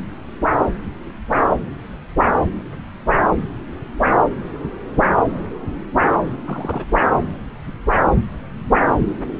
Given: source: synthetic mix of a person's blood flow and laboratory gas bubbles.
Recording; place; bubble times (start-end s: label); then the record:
Doppler ultrasound of blood flow; subclavian vein
6.46-6.83 s: bubbles
From the record:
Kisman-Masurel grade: 211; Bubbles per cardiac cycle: several, 3 to 8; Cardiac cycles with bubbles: 1 to 10%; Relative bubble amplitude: barely perceptible (0.100 to 0.250); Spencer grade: 1 (occasional bubble signal discernible with the cardiac motion signal, with majority of cardiac periods free of bubbles); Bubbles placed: anywhere in the cardiac cycle